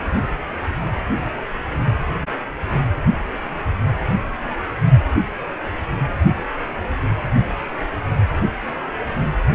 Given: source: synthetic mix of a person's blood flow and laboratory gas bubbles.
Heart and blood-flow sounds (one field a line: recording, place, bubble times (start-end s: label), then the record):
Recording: Doppler ultrasound of blood flow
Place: precordium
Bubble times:
no bubbles
From the record:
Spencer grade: 0 (complete lack of bubble signals)